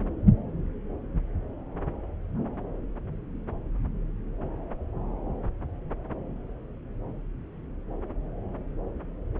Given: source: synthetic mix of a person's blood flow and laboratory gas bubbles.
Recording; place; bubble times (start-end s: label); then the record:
Doppler ultrasound of blood flow; subclavian vein
no bubbles
From the record:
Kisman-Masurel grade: 000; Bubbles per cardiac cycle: 0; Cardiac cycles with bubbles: 0%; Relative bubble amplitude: no bubbles discernible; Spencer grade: 0 (complete lack of bubble signals)